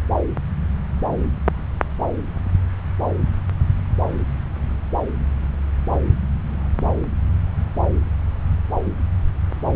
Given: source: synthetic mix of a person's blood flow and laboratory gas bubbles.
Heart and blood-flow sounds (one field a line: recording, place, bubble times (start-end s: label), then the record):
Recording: Doppler ultrasound of blood flow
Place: subclavian vein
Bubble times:
no bubbles
From the record:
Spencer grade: 0 (complete lack of bubble signals)